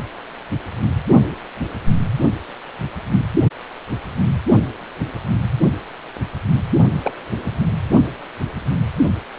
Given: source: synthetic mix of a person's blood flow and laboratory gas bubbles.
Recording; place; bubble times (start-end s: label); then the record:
Doppler ultrasound of blood flow; precordium
7.03-7.12 s: bubbles
7.46-7.50 s: bubbles
From the record:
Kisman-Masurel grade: 112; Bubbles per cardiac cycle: 1 to 2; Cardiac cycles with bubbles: 1 to 10%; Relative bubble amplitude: moderate (0.250 to 0.450); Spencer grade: 1 (occasional bubble signal discernible with the cardiac motion signal, with majority of cardiac periods free of bubbles); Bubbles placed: only in the low amplitude regions of the cardiac cycle